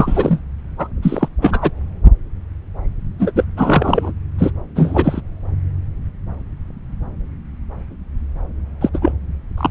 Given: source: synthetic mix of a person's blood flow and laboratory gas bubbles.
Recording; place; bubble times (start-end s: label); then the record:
Doppler ultrasound of blood flow; subclavian vein
0.00-0.40 s: bubbles
0.77-0.87 s: bubbles
1.02-1.28 s: bubbles
1.42-1.72 s: bubbles
3.19-3.31 s: bubbles
3.35-3.45 s: bubbles
3.56-4.12 s: bubbles
4.38-4.51 s: bubbles
4.75-5.21 s: bubbles
8.81-8.89 s: bubbles
8.94-8.99 s: bubbles
9.02-9.12 s: bubbles
9.57-9.70 s: bubbles
From the record:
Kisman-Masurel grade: 233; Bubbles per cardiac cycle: several, 3 to 8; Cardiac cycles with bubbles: 50 to 99%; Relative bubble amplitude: loud (0.450 to 0.775); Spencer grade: 3 (all of the cardiac periods contain showers or single bubble signals, but not dominating or overriding the cardiac motion signals); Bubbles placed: anywhere in the cardiac cycle